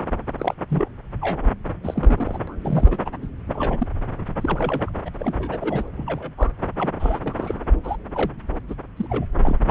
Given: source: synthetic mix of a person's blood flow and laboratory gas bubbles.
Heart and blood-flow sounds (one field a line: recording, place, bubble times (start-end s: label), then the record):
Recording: Doppler ultrasound of blood flow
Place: subclavian vein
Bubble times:
0.39-0.54 s: bubbles
0.70-0.88 s: bubbles
1.22-1.40 s: bubbles
1.83-2.38 s: bubbles
2.47-2.58 s: bubbles
2.62-2.99 s: bubbles
3.05-3.10 s: bubbles
3.22-3.27 s: bubbles
3.46-3.86 s: bubbles
4.40-4.91 s: bubbles
5.05-5.10 s: bubbles
5.13-5.15 s: bubbles
5.20-5.85 s: bubbles
5.92-6.31 s: bubbles
6.37-6.50 s: bubbles
6.77-6.90 s: bubbles
6.99-7.19 s: bubbles
7.23-7.64 s: bubbles
7.84-7.96 s: bubbles
8.14-8.30 s: bubbles
8.68-8.75 s: bubbles
8.96-9.26 s: bubbles
9.38-9.58 s: bubbles
9.67-9.71 s: bubbles
From the record:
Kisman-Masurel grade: 242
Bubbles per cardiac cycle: several, 3 to 8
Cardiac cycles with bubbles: 100%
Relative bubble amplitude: moderate (0.250 to 0.450)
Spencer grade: 3 (all of the cardiac periods contain showers or single bubble signals, but not dominating or overriding the cardiac motion signals)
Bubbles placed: anywhere in the cardiac cycle